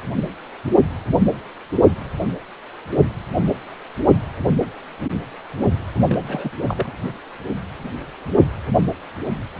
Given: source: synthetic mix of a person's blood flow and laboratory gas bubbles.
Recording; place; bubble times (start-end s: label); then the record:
Doppler ultrasound of blood flow; precordium
6.09-6.50 s: bubbles
6.67-6.92 s: bubbles
From the record:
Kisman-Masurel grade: 211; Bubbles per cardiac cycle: several, 3 to 8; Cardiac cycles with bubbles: 1 to 10%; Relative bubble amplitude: barely perceptible (0.100 to 0.250); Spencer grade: 1 (occasional bubble signal discernible with the cardiac motion signal, with majority of cardiac periods free of bubbles); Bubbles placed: anywhere in the cardiac cycle